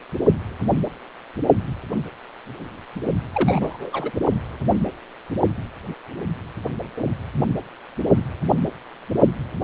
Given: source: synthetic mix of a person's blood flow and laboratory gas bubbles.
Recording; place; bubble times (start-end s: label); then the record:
Doppler ultrasound of blood flow; precordium
3.33-4.12 s: bubbles
From the record:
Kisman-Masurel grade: 222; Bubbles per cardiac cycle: several, 3 to 8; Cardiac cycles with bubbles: 10 to 50%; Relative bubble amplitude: moderate (0.250 to 0.450); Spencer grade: 2 (many but less than half of the cardiac periods contain bubble signals, singularly or in groups); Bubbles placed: only in the low amplitude regions of the cardiac cycle